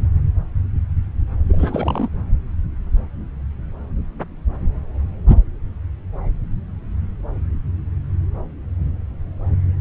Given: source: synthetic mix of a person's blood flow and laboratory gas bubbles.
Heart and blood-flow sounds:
Doppler ultrasound of blood flow; subclavian vein
1.48-2.09 s: bubbles
From the record:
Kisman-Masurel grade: 212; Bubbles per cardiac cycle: several, 3 to 8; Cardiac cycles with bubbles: 1 to 10%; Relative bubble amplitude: moderate (0.250 to 0.450); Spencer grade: 1 (occasional bubble signal discernible with the cardiac motion signal, with majority of cardiac periods free of bubbles); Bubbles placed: anywhere in the cardiac cycle

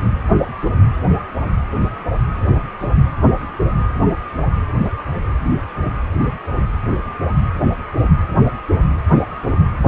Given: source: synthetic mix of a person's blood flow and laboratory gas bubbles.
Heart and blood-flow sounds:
Doppler ultrasound of blood flow; precordium
4.84-4.91 s: bubbles
From the record:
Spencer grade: 1 (occasional bubble signal discernible with the cardiac motion signal, with majority of cardiac periods free of bubbles); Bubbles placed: anywhere in the cardiac cycle

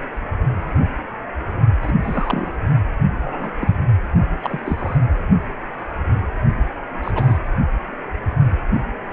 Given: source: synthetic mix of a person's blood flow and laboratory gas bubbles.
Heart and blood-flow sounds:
Doppler ultrasound of blood flow; precordium
1.82-1.93 s: bubbles
2.02-2.50 s: bubbles
3.23-3.51 s: bubbles
3.60-3.75 s: bubbles
4.42-4.59 s: bubbles
4.66-4.96 s: bubbles
7.02-7.38 s: bubbles
From the record:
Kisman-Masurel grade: 222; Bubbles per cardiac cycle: several, 3 to 8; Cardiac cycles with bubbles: 10 to 50%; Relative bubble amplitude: moderate (0.250 to 0.450); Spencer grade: 2 (many but less than half of the cardiac periods contain bubble signals, singularly or in groups); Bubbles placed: only in the low amplitude regions of the cardiac cycle

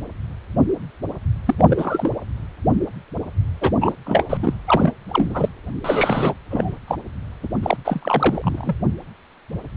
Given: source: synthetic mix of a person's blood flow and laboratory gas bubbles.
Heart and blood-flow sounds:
Doppler ultrasound of blood flow; precordium
1.45-1.55 s: bubbles
1.58-1.65 s: bubbles
1.69-2.15 s: bubbles
3.61-3.72 s: bubbles
3.81-3.93 s: bubbles
4.06-4.23 s: bubbles
4.29-4.38 s: bubbles
4.42-4.54 s: bubbles
4.67-4.92 s: bubbles
5.08-5.49 s: bubbles
5.84-6.33 s: bubbles
6.50-6.78 s: bubbles
6.87-6.96 s: bubbles
7.43-7.48 s: bubbles
7.62-7.77 s: bubbles
7.85-8.76 s: bubbles
From the record:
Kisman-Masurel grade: 332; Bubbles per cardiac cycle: rolling drumbeat, 9 or more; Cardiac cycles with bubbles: 50 to 99%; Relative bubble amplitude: moderate (0.250 to 0.450); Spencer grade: 3 (all of the cardiac periods contain showers or single bubble signals, but not dominating or overriding the cardiac motion signals); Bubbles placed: anywhere in the cardiac cycle

